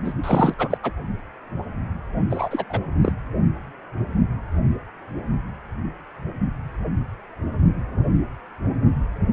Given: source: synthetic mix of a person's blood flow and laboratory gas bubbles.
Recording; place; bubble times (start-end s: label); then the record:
Doppler ultrasound of blood flow; precordium
0.04-0.13 s: bubbles
0.23-0.54 s: bubbles
0.58-0.78 s: bubbles
0.83-0.92 s: bubbles
2.30-2.64 s: bubbles
2.69-2.80 s: bubbles
3.02-3.12 s: bubbles
From the record:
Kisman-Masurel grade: 222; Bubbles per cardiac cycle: several, 3 to 8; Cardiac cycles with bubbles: 10 to 50%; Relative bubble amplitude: moderate (0.250 to 0.450); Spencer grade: 2 (many but less than half of the cardiac periods contain bubble signals, singularly or in groups); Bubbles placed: only in the low amplitude regions of the cardiac cycle